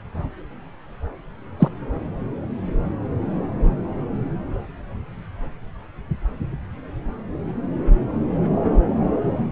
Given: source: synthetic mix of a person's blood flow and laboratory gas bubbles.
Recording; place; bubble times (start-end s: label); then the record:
Doppler ultrasound of blood flow; subclavian vein
1.59-1.69 s: bubbles
From the record:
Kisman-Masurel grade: 113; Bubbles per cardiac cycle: 1 to 2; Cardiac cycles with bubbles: 1 to 10%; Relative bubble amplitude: loud (0.450 to 0.775); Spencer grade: 1 (occasional bubble signal discernible with the cardiac motion signal, with majority of cardiac periods free of bubbles); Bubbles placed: anywhere in the cardiac cycle